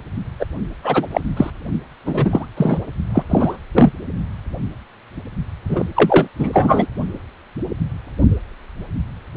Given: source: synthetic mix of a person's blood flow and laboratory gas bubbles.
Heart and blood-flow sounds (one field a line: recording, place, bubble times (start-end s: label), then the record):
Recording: Doppler ultrasound of blood flow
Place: precordium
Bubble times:
0.39-0.46 s: bubbles
0.84-1.07 s: bubbles
1.11-1.21 s: bubbles
1.36-1.50 s: bubbles
2.06-2.46 s: bubbles
2.56-2.78 s: bubbles
3.15-3.23 s: bubbles
3.29-3.57 s: bubbles
3.73-3.92 s: bubbles
5.69-5.85 s: bubbles
5.95-6.28 s: bubbles
6.39-6.51 s: bubbles
6.53-6.87 s: bubbles
From the record:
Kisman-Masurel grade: 223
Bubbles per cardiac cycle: several, 3 to 8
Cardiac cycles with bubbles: 10 to 50%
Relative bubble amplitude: loud (0.450 to 0.775)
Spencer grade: 2 (many but less than half of the cardiac periods contain bubble signals, singularly or in groups)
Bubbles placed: only in the low amplitude regions of the cardiac cycle